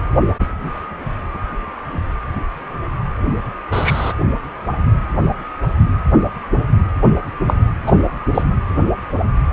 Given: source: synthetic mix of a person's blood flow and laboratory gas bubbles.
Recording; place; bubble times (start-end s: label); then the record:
Doppler ultrasound of blood flow; precordium
0.40-0.46 s: bubbles
3.71-4.13 s: bubbles
7.47-7.54 s: bubbles
7.86-7.93 s: bubbles
8.34-8.44 s: bubbles
From the record:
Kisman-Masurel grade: 123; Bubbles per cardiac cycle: 1 to 2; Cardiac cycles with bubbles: 10 to 50%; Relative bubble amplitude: loud (0.450 to 0.775); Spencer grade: 2 (many but less than half of the cardiac periods contain bubble signals, singularly or in groups); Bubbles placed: anywhere in the cardiac cycle